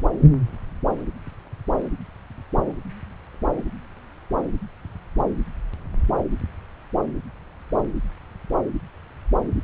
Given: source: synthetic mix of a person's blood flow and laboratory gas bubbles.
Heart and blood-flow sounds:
Doppler ultrasound of blood flow; subclavian vein
no bubbles
From the record:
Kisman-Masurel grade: 000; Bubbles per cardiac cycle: 0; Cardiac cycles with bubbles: 0%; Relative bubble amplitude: no bubbles discernible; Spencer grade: 0 (complete lack of bubble signals)

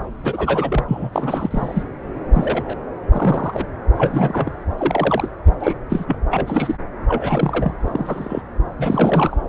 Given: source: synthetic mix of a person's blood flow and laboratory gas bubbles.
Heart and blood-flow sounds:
Doppler ultrasound of blood flow; subclavian vein
0.23-0.84 s: bubbles
0.88-1.09 s: bubbles
1.13-1.83 s: bubbles
2.32-2.77 s: bubbles
3.12-3.67 s: bubbles
3.95-4.51 s: bubbles
4.77-5.30 s: bubbles
5.60-5.78 s: bubbles
5.89-6.18 s: bubbles
6.29-6.75 s: bubbles
7.08-7.73 s: bubbles
7.84-8.42 s: bubbles
8.79-9.38 s: bubbles
From the record:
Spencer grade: 3 (all of the cardiac periods contain showers or single bubble signals, but not dominating or overriding the cardiac motion signals); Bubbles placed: anywhere in the cardiac cycle

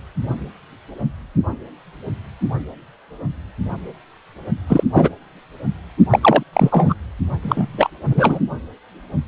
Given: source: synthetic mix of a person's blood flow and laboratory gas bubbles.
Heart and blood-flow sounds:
Doppler ultrasound of blood flow; precordium
4.67-4.84 s: bubbles
4.93-5.10 s: bubbles
6.11-6.43 s: bubbles
6.53-6.95 s: bubbles
7.42-7.90 s: bubbles
8.10-8.39 s: bubbles
From the record:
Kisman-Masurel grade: 223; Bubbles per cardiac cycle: several, 3 to 8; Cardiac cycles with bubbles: 10 to 50%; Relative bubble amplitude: loud (0.450 to 0.775); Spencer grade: 2 (many but less than half of the cardiac periods contain bubble signals, singularly or in groups); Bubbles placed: only in the low amplitude regions of the cardiac cycle

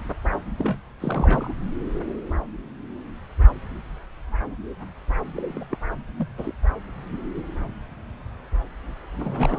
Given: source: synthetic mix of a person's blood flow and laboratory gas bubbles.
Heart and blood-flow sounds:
Doppler ultrasound of blood flow; subclavian vein
0.57-0.78 s: bubbles
1.00-1.53 s: bubbles
5.35-5.43 s: bubbles
5.48-5.64 s: bubbles
5.71-5.77 s: bubbles
6.17-6.27 s: bubbles
6.38-6.55 s: bubbles
9.15-9.59 s: bubbles
From the record:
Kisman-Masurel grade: 221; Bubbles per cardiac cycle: several, 3 to 8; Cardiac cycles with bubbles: 10 to 50%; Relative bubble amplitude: barely perceptible (0.100 to 0.250); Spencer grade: 2 (many but less than half of the cardiac periods contain bubble signals, singularly or in groups); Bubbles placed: anywhere in the cardiac cycle

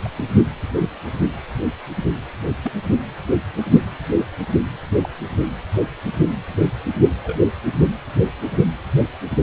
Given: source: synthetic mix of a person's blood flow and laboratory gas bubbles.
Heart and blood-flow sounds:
Doppler ultrasound of blood flow; precordium
0.04-0.08 s: bubbles
0.16-0.23 s: bubbles
0.76-0.84 s: bubbles
2.62-2.72 s: bubbles
5.01-5.09 s: bubbles
7.24-7.38 s: bubbles
From the record:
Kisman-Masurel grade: 121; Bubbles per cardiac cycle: 1 to 2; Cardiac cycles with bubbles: 10 to 50%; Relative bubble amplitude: barely perceptible (0.100 to 0.250); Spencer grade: 2 (many but less than half of the cardiac periods contain bubble signals, singularly or in groups); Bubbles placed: only in the low amplitude regions of the cardiac cycle

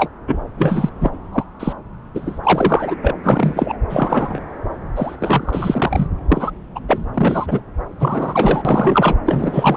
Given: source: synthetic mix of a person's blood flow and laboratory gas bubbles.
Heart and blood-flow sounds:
Doppler ultrasound of blood flow; subclavian vein
0.00-0.10 s: bubbles
0.27-0.39 s: bubbles
0.58-0.90 s: bubbles
1.01-1.11 s: bubbles
1.32-1.44 s: bubbles
1.59-1.73 s: bubbles
2.15-2.39 s: bubbles
2.43-2.95 s: bubbles
3.01-3.15 s: bubbles
3.22-3.77 s: bubbles
3.90-4.44 s: bubbles
4.96-5.16 s: bubbles
5.19-6.07 s: bubbles
6.29-6.51 s: bubbles
6.75-6.79 s: bubbles
6.88-7.06 s: bubbles
7.14-7.61 s: bubbles
8.00-9.16 s: bubbles
9.25-9.77 s: bubbles
From the record:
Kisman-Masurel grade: 243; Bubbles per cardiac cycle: several, 3 to 8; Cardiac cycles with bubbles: 100%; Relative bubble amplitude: loud (0.450 to 0.775); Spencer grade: 3 (all of the cardiac periods contain showers or single bubble signals, but not dominating or overriding the cardiac motion signals); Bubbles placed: anywhere in the cardiac cycle

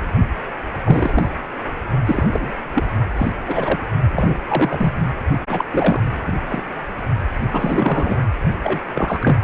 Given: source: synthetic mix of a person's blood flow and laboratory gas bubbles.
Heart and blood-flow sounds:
Doppler ultrasound of blood flow; precordium
0.83-1.28 s: bubbles
2.04-2.57 s: bubbles
2.74-2.84 s: bubbles
3.16-3.32 s: bubbles
3.47-3.80 s: bubbles
4.12-4.39 s: bubbles
4.48-5.11 s: bubbles
5.48-5.64 s: bubbles
5.71-6.00 s: bubbles
6.26-6.34 s: bubbles
6.49-6.63 s: bubbles
7.52-8.22 s: bubbles
8.63-8.79 s: bubbles
8.95-9.38 s: bubbles
From the record:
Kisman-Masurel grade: 243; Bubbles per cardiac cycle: several, 3 to 8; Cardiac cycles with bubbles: 100%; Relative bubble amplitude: loud (0.450 to 0.775); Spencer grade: 3 (all of the cardiac periods contain showers or single bubble signals, but not dominating or overriding the cardiac motion signals); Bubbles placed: only in the low amplitude regions of the cardiac cycle

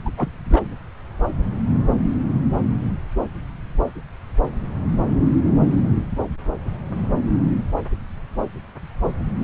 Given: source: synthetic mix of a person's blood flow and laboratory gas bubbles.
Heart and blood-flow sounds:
Doppler ultrasound of blood flow; subclavian vein
0.05-0.10 s: bubbles
0.16-0.29 s: bubbles
0.44-0.61 s: bubbles
From the record:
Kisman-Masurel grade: 212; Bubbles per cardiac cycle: several, 3 to 8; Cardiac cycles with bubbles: 1 to 10%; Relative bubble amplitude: moderate (0.250 to 0.450); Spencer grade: 1 (occasional bubble signal discernible with the cardiac motion signal, with majority of cardiac periods free of bubbles); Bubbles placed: anywhere in the cardiac cycle

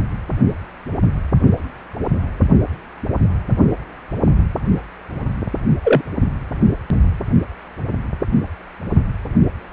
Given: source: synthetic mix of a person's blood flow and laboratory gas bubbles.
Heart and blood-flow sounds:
Doppler ultrasound of blood flow; precordium
5.84-6.02 s: bubbles
From the record:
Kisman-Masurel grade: 123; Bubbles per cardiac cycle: 1 to 2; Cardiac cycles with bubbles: 10 to 50%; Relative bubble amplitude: loud (0.450 to 0.775); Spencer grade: 2 (many but less than half of the cardiac periods contain bubble signals, singularly or in groups); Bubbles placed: only in the low amplitude regions of the cardiac cycle

